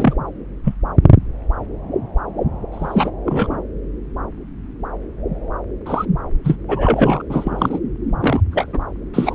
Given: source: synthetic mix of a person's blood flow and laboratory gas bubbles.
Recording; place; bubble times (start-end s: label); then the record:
Doppler ultrasound of blood flow; subclavian vein
0.00-0.14 s: bubbles
0.64-0.75 s: bubbles
2.71-3.10 s: bubbles
3.26-3.56 s: bubbles
5.86-6.05 s: bubbles
6.43-6.56 s: bubbles
6.68-7.22 s: bubbles
7.30-7.79 s: bubbles
8.20-8.40 s: bubbles
8.52-8.78 s: bubbles
9.13-9.35 s: bubbles
From the record:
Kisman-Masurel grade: 233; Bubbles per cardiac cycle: several, 3 to 8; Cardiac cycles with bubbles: 50 to 99%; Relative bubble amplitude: loud (0.450 to 0.775); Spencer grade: 3 (all of the cardiac periods contain showers or single bubble signals, but not dominating or overriding the cardiac motion signals); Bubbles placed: anywhere in the cardiac cycle